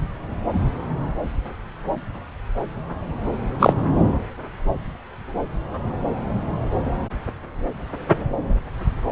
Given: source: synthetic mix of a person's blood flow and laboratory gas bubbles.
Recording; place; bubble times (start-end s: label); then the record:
Doppler ultrasound of blood flow; subclavian vein
3.59-3.73 s: bubbles
From the record:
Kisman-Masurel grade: 113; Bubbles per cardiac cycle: 1 to 2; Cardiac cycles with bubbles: 1 to 10%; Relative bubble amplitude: loud (0.450 to 0.775); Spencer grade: 1 (occasional bubble signal discernible with the cardiac motion signal, with majority of cardiac periods free of bubbles); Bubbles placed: anywhere in the cardiac cycle